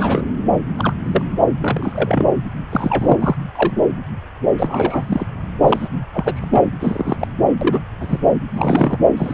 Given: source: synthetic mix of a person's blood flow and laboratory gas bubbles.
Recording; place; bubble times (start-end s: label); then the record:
Doppler ultrasound of blood flow; subclavian vein
0.00-0.29 s: bubbles
0.77-0.94 s: bubbles
1.05-1.22 s: bubbles
1.60-2.27 s: bubbles
2.69-3.17 s: bubbles
3.20-3.36 s: bubbles
3.55-3.77 s: bubbles
4.58-5.26 s: bubbles
5.62-5.88 s: bubbles
6.14-6.62 s: bubbles
6.80-7.16 s: bubbles
7.20-7.28 s: bubbles
7.61-7.80 s: bubbles
8.00-8.19 s: bubbles
8.55-8.98 s: bubbles
9.17-9.33 s: bubbles
From the record:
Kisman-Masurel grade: 242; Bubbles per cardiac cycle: several, 3 to 8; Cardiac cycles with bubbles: 100%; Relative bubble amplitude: moderate (0.250 to 0.450); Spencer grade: 3 (all of the cardiac periods contain showers or single bubble signals, but not dominating or overriding the cardiac motion signals); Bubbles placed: anywhere in the cardiac cycle